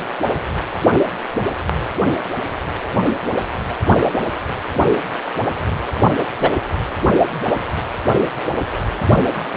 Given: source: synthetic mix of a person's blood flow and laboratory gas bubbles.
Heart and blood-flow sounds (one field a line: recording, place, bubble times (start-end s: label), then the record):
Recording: Doppler ultrasound of blood flow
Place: precordium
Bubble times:
6.42-6.50 s: bubbles
From the record:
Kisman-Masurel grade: 123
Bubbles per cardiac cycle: 1 to 2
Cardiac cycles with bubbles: 10 to 50%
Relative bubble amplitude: loud (0.450 to 0.775)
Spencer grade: 2 (many but less than half of the cardiac periods contain bubble signals, singularly or in groups)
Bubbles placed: only in the low amplitude regions of the cardiac cycle